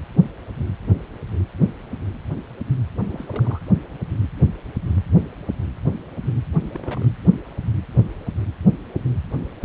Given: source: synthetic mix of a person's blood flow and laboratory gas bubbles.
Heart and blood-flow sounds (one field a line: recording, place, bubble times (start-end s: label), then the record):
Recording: Doppler ultrasound of blood flow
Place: precordium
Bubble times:
3.10-3.59 s: bubbles
6.73-7.06 s: bubbles
From the record:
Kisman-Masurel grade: 221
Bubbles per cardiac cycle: several, 3 to 8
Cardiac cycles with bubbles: 10 to 50%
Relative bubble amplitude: barely perceptible (0.100 to 0.250)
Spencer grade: 2 (many but less than half of the cardiac periods contain bubble signals, singularly or in groups)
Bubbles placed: anywhere in the cardiac cycle